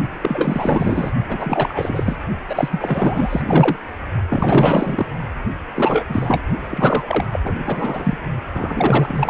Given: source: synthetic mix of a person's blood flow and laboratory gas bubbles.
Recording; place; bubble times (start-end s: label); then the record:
Doppler ultrasound of blood flow; precordium
0.21-1.12 s: bubbles
1.28-2.17 s: bubbles
2.49-3.42 s: bubbles
3.46-3.77 s: bubbles
4.29-5.07 s: bubbles
5.75-6.04 s: bubbles
6.08-6.44 s: bubbles
6.70-7.03 s: bubbles
7.07-7.25 s: bubbles
7.32-7.41 s: bubbles
7.44-8.18 s: bubbles
8.53-9.30 s: bubbles
From the record:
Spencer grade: 4 (maximum detectable bubble signal sounding continuously throughout systole and diastole of every cardiac period, and overriding the amplitude of the normal cardiac signals); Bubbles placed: only in the low amplitude regions of the cardiac cycle